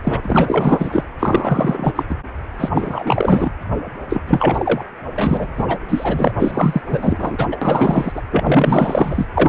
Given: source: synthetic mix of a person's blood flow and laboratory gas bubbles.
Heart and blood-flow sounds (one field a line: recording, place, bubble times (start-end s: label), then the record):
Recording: Doppler ultrasound of blood flow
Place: precordium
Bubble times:
0.04-0.21 s: bubbles
0.23-1.04 s: bubbles
1.19-2.04 s: bubbles
2.09-2.16 s: bubbles
2.59-2.69 s: bubbles
2.73-3.50 s: bubbles
4.09-4.21 s: bubbles
4.27-4.85 s: bubbles
5.14-5.53 s: bubbles
5.57-5.79 s: bubbles
5.89-6.32 s: bubbles
6.39-6.82 s: bubbles
6.86-7.47 s: bubbles
7.52-7.57 s: bubbles
7.62-8.21 s: bubbles
8.30-9.26 s: bubbles
9.35-9.49 s: bubbles
From the record:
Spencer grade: 4 (maximum detectable bubble signal sounding continuously throughout systole and diastole of every cardiac period, and overriding the amplitude of the normal cardiac signals)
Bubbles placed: anywhere in the cardiac cycle